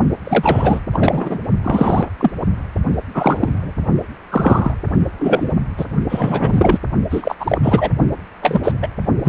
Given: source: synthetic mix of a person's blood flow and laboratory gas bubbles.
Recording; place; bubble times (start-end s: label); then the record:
Doppler ultrasound of blood flow; precordium
0.23-0.80 s: bubbles
0.93-1.39 s: bubbles
1.64-2.10 s: bubbles
2.19-2.31 s: bubbles
3.15-3.73 s: bubbles
4.31-4.75 s: bubbles
5.19-5.53 s: bubbles
5.77-5.86 s: bubbles
6.09-6.79 s: bubbles
7.10-7.35 s: bubbles
7.39-7.58 s: bubbles
7.62-7.90 s: bubbles
8.41-8.74 s: bubbles
8.82-8.88 s: bubbles
9.23-9.29 s: bubbles
From the record:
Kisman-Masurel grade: 243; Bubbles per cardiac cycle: several, 3 to 8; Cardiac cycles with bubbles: 100%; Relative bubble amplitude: loud (0.450 to 0.775); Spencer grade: 3 (all of the cardiac periods contain showers or single bubble signals, but not dominating or overriding the cardiac motion signals); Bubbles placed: only in the low amplitude regions of the cardiac cycle